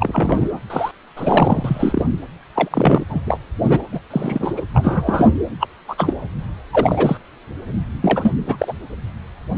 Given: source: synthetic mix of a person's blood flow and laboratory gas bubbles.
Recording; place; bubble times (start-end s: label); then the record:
Doppler ultrasound of blood flow; precordium
0.00-0.59 s: bubbles
0.70-0.92 s: bubbles
1.16-2.08 s: bubbles
2.54-3.04 s: bubbles
3.09-3.21 s: bubbles
3.25-3.38 s: bubbles
3.61-3.82 s: bubbles
3.92-3.99 s: bubbles
4.11-4.54 s: bubbles
4.57-4.62 s: bubbles
4.73-5.30 s: bubbles
5.60-5.68 s: bubbles
5.88-6.14 s: bubbles
6.73-7.18 s: bubbles
8.01-8.32 s: bubbles
8.46-8.73 s: bubbles
From the record:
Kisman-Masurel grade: 233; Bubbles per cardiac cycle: several, 3 to 8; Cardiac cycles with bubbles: 50 to 99%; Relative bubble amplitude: loud (0.450 to 0.775); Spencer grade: 3 (all of the cardiac periods contain showers or single bubble signals, but not dominating or overriding the cardiac motion signals); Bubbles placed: anywhere in the cardiac cycle